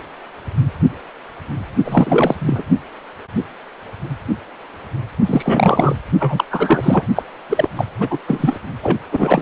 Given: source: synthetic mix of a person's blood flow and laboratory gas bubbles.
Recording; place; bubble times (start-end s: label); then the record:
Doppler ultrasound of blood flow; precordium
1.84-2.35 s: bubbles
2.39-2.63 s: bubbles
5.25-5.96 s: bubbles
6.19-6.44 s: bubbles
6.50-7.07 s: bubbles
7.16-7.23 s: bubbles
7.50-7.68 s: bubbles
7.76-7.84 s: bubbles
8.00-8.19 s: bubbles
8.28-8.59 s: bubbles
8.83-8.98 s: bubbles
9.12-9.42 s: bubbles
From the record:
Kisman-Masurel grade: 333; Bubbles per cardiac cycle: rolling drumbeat, 9 or more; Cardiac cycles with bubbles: 50 to 99%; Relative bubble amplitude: loud (0.450 to 0.775); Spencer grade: 3 (all of the cardiac periods contain showers or single bubble signals, but not dominating or overriding the cardiac motion signals); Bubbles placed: only in the low amplitude regions of the cardiac cycle